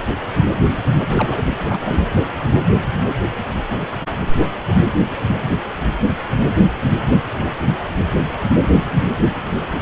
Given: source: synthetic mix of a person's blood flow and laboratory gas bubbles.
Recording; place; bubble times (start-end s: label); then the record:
Doppler ultrasound of blood flow; precordium
1.08-1.43 s: bubbles
1.56-2.01 s: bubbles
From the record:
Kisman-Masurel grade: 211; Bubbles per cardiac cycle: several, 3 to 8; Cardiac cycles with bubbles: 1 to 10%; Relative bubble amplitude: barely perceptible (0.100 to 0.250); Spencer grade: 1 (occasional bubble signal discernible with the cardiac motion signal, with majority of cardiac periods free of bubbles); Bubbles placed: anywhere in the cardiac cycle